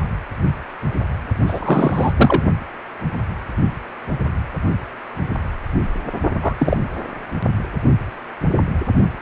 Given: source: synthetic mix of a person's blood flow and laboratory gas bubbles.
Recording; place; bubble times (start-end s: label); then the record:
Doppler ultrasound of blood flow; precordium
1.46-2.13 s: bubbles
2.16-2.43 s: bubbles
6.42-6.56 s: bubbles
6.59-6.77 s: bubbles
From the record:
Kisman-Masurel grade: 223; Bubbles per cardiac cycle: several, 3 to 8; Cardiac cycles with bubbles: 10 to 50%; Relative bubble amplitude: loud (0.450 to 0.775); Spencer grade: 2 (many but less than half of the cardiac periods contain bubble signals, singularly or in groups); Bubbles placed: only in the low amplitude regions of the cardiac cycle